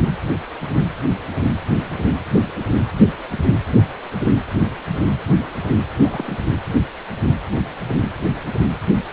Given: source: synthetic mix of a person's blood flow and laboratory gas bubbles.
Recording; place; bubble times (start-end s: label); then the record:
Doppler ultrasound of blood flow; precordium
6.00-6.36 s: bubbles
From the record:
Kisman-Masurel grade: 121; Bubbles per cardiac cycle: 1 to 2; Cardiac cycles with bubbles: 10 to 50%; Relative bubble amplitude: barely perceptible (0.100 to 0.250); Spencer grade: 2 (many but less than half of the cardiac periods contain bubble signals, singularly or in groups); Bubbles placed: anywhere in the cardiac cycle